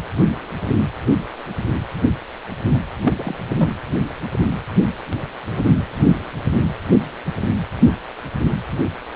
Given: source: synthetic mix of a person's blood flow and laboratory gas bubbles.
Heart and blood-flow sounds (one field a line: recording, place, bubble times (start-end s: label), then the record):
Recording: Doppler ultrasound of blood flow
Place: precordium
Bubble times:
3.03-3.13 s: bubbles
3.18-3.36 s: bubbles
3.51-3.56 s: bubbles
3.58-3.73 s: bubbles
From the record:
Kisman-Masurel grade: 212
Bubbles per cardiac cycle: several, 3 to 8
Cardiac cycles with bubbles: 1 to 10%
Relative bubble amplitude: moderate (0.250 to 0.450)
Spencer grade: 1 (occasional bubble signal discernible with the cardiac motion signal, with majority of cardiac periods free of bubbles)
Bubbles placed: anywhere in the cardiac cycle